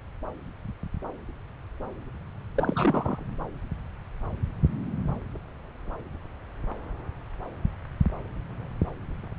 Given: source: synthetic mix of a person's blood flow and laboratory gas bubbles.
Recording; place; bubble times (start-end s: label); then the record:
Doppler ultrasound of blood flow; subclavian vein
2.56-3.23 s: bubbles
From the record:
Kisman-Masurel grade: 211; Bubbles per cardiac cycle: several, 3 to 8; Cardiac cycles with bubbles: 1 to 10%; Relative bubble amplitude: barely perceptible (0.100 to 0.250); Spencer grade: 1 (occasional bubble signal discernible with the cardiac motion signal, with majority of cardiac periods free of bubbles); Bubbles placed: anywhere in the cardiac cycle